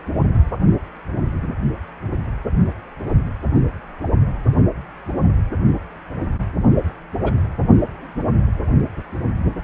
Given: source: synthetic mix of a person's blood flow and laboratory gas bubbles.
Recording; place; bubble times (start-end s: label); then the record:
Doppler ultrasound of blood flow; precordium
7.25-7.32 s: bubbles
From the record:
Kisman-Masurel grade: 112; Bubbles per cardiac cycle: 1 to 2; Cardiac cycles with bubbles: 1 to 10%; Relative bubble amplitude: moderate (0.250 to 0.450); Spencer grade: 1 (occasional bubble signal discernible with the cardiac motion signal, with majority of cardiac periods free of bubbles); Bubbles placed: anywhere in the cardiac cycle